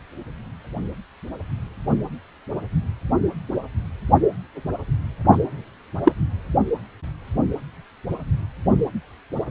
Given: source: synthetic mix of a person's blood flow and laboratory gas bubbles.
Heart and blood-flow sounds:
Doppler ultrasound of blood flow; precordium
5.31-5.38 s: bubbles
6.04-6.12 s: bubbles
From the record:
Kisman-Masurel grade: 123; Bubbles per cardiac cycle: 1 to 2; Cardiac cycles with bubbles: 10 to 50%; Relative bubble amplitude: loud (0.450 to 0.775); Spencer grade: 2 (many but less than half of the cardiac periods contain bubble signals, singularly or in groups); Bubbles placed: anywhere in the cardiac cycle

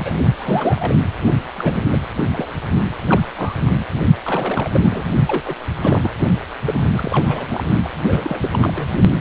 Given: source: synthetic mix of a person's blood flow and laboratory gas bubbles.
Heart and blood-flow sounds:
Doppler ultrasound of blood flow; precordium
0.00-0.22 s: bubbles
0.37-0.95 s: bubbles
1.54-1.82 s: bubbles
1.91-1.99 s: bubbles
2.17-2.24 s: bubbles
2.32-2.48 s: bubbles
3.06-3.23 s: bubbles
3.35-3.54 s: bubbles
3.65-3.74 s: bubbles
3.78-3.85 s: bubbles
4.24-5.07 s: bubbles
5.27-5.42 s: bubbles
5.46-5.53 s: bubbles
5.82-6.10 s: bubbles
6.65-6.86 s: bubbles
6.91-7.46 s: bubbles
7.49-7.66 s: bubbles
7.84-7.89 s: bubbles
8.05-8.89 s: bubbles
From the record:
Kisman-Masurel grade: 342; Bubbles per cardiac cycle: rolling drumbeat, 9 or more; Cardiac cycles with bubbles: 100%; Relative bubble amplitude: moderate (0.250 to 0.450); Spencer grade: 3 (all of the cardiac periods contain showers or single bubble signals, but not dominating or overriding the cardiac motion signals); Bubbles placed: only in the low amplitude regions of the cardiac cycle

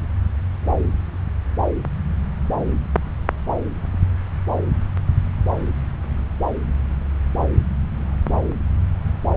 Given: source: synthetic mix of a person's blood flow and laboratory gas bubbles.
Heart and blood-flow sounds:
Doppler ultrasound of blood flow; subclavian vein
no bubbles
From the record:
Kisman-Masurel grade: 000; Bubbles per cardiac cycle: 0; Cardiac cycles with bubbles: 0%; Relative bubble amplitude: no bubbles discernible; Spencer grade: 0 (complete lack of bubble signals)

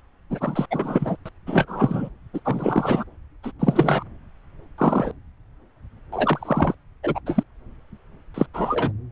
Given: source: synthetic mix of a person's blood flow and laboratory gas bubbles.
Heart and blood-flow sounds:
Doppler ultrasound of blood flow; subclavian vein
0.30-0.66 s: bubbles
0.71-1.17 s: bubbles
1.26-1.29 s: bubbles
1.47-2.09 s: bubbles
2.33-2.40 s: bubbles
2.44-3.04 s: bubbles
3.43-3.52 s: bubbles
3.59-4.04 s: bubbles
4.78-5.12 s: bubbles
6.12-6.74 s: bubbles
7.03-7.20 s: bubbles
7.26-7.43 s: bubbles
8.34-8.46 s: bubbles
8.54-8.92 s: bubbles
From the record:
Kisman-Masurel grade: 243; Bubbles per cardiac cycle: several, 3 to 8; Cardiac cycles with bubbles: 100%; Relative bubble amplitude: loud (0.450 to 0.775); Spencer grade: 3 (all of the cardiac periods contain showers or single bubble signals, but not dominating or overriding the cardiac motion signals); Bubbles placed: anywhere in the cardiac cycle

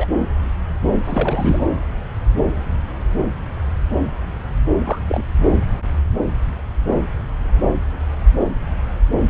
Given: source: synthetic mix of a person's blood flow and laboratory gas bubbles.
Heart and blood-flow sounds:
Doppler ultrasound of blood flow; subclavian vein
0.00-0.08 s: bubbles
1.04-1.62 s: bubbles
4.84-4.98 s: bubbles
5.08-5.25 s: bubbles
From the record:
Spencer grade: 2 (many but less than half of the cardiac periods contain bubble signals, singularly or in groups); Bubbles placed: anywhere in the cardiac cycle

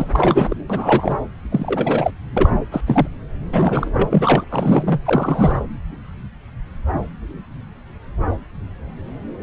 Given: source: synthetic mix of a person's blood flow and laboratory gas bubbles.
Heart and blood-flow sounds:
Doppler ultrasound of blood flow; subclavian vein
0.00-0.08 s: bubbles
0.15-0.57 s: bubbles
0.70-1.20 s: bubbles
1.51-2.11 s: bubbles
2.37-2.50 s: bubbles
2.71-2.81 s: bubbles
2.86-3.08 s: bubbles
3.52-3.88 s: bubbles
3.93-4.44 s: bubbles
4.50-5.00 s: bubbles
5.04-5.59 s: bubbles
From the record:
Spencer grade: 3 (all of the cardiac periods contain showers or single bubble signals, but not dominating or overriding the cardiac motion signals); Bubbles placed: anywhere in the cardiac cycle

